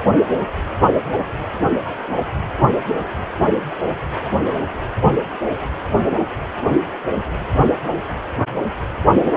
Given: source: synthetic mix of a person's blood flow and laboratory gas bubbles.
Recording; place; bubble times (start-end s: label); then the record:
Doppler ultrasound of blood flow; precordium
no bubbles
From the record:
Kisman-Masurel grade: 000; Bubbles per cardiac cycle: 0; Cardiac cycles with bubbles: 0%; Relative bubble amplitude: no bubbles discernible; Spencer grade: 0 (complete lack of bubble signals)